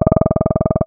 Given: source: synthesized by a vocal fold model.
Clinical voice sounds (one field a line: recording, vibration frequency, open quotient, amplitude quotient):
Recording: sustained vowel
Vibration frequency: 20 Hz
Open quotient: 0.1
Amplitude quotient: 1.1